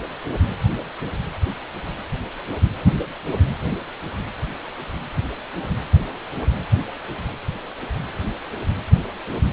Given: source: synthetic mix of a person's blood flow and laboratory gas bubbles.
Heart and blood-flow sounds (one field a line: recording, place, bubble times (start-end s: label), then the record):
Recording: Doppler ultrasound of blood flow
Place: precordium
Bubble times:
no bubbles
From the record:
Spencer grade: 0 (complete lack of bubble signals)